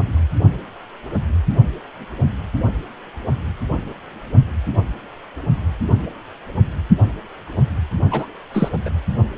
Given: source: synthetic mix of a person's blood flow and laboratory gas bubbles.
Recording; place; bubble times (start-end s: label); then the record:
Doppler ultrasound of blood flow; precordium
8.11-8.26 s: bubbles
8.54-8.69 s: bubbles
8.85-8.89 s: bubbles
From the record:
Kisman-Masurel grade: 212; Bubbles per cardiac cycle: several, 3 to 8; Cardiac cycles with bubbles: 1 to 10%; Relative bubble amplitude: moderate (0.250 to 0.450); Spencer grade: 1 (occasional bubble signal discernible with the cardiac motion signal, with majority of cardiac periods free of bubbles); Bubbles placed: only in the low amplitude regions of the cardiac cycle